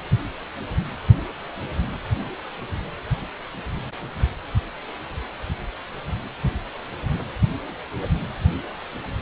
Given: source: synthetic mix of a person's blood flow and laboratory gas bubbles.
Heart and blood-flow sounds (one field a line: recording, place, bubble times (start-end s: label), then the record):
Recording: Doppler ultrasound of blood flow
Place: precordium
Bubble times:
no bubbles
From the record:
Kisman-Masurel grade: 000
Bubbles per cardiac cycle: 0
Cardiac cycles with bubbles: 0%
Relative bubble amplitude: no bubbles discernible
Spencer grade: 0 (complete lack of bubble signals)